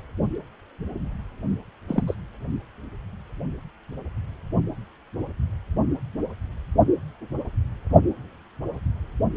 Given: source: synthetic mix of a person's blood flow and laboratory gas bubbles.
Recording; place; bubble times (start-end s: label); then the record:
Doppler ultrasound of blood flow; precordium
1.88-2.02 s: bubbles
2.07-2.14 s: bubbles
From the record:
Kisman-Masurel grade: 112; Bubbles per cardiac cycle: 1 to 2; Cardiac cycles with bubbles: 1 to 10%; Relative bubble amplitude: moderate (0.250 to 0.450); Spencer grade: 1 (occasional bubble signal discernible with the cardiac motion signal, with majority of cardiac periods free of bubbles); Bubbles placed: only in the low amplitude regions of the cardiac cycle